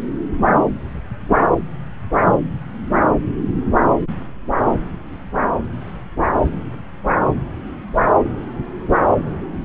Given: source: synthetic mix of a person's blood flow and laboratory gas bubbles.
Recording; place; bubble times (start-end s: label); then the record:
Doppler ultrasound of blood flow; subclavian vein
no bubbles
From the record:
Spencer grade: 0 (complete lack of bubble signals)